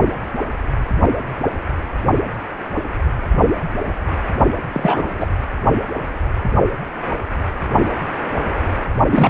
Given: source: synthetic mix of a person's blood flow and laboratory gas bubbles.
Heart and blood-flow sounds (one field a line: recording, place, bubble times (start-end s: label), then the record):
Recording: Doppler ultrasound of blood flow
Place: precordium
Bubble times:
4.72-5.03 s: bubbles
5.18-5.26 s: bubbles
9.11-9.29 s: bubbles
From the record:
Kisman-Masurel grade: 223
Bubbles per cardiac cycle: several, 3 to 8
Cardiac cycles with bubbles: 10 to 50%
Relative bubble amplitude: loud (0.450 to 0.775)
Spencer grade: 2 (many but less than half of the cardiac periods contain bubble signals, singularly or in groups)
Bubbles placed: only in the low amplitude regions of the cardiac cycle